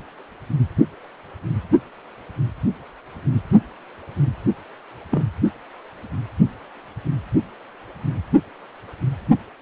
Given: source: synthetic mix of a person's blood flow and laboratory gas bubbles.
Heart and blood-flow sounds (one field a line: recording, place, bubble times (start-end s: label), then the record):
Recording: Doppler ultrasound of blood flow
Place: precordium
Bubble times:
5.11-5.24 s: bubbles
From the record:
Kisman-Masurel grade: 112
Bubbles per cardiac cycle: 1 to 2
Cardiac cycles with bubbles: 1 to 10%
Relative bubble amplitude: moderate (0.250 to 0.450)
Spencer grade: 1 (occasional bubble signal discernible with the cardiac motion signal, with majority of cardiac periods free of bubbles)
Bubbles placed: only in the low amplitude regions of the cardiac cycle